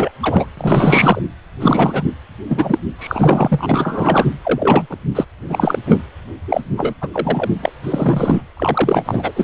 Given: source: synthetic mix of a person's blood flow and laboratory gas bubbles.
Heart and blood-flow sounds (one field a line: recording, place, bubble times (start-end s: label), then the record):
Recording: Doppler ultrasound of blood flow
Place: precordium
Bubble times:
0.00-0.11 s: bubbles
0.21-0.46 s: bubbles
0.57-1.21 s: bubbles
1.60-2.02 s: bubbles
2.48-2.78 s: bubbles
2.99-4.26 s: bubbles
4.45-4.87 s: bubbles
4.90-4.96 s: bubbles
5.15-5.25 s: bubbles
5.49-5.79 s: bubbles
5.87-5.99 s: bubbles
6.48-6.61 s: bubbles
6.77-6.94 s: bubbles
7.01-7.08 s: bubbles
7.13-7.49 s: bubbles
7.62-7.71 s: bubbles
7.83-8.42 s: bubbles
8.56-9.32 s: bubbles
9.36-9.44 s: bubbles
From the record:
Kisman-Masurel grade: 343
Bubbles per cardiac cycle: rolling drumbeat, 9 or more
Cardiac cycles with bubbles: 100%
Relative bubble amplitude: loud (0.450 to 0.775)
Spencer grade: 3 (all of the cardiac periods contain showers or single bubble signals, but not dominating or overriding the cardiac motion signals)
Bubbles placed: anywhere in the cardiac cycle